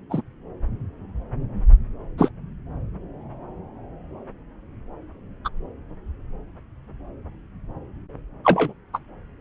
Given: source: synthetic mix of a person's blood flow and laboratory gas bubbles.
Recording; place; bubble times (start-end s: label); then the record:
Doppler ultrasound of blood flow; subclavian vein
0.09-0.22 s: bubbles
2.18-2.29 s: bubbles
5.44-5.49 s: bubbles
8.45-8.73 s: bubbles
8.93-8.98 s: bubbles
From the record:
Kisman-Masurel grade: 123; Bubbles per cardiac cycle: 1 to 2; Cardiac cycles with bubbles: 10 to 50%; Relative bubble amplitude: loud (0.450 to 0.775); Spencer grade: 2 (many but less than half of the cardiac periods contain bubble signals, singularly or in groups); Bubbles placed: anywhere in the cardiac cycle